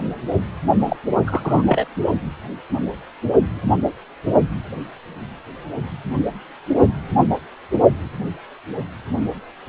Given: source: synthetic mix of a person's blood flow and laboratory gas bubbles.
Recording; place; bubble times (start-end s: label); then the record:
Doppler ultrasound of blood flow; precordium
0.85-0.96 s: bubbles
1.27-1.63 s: bubbles
1.67-1.88 s: bubbles
From the record:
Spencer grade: 2 (many but less than half of the cardiac periods contain bubble signals, singularly or in groups); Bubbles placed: only in the low amplitude regions of the cardiac cycle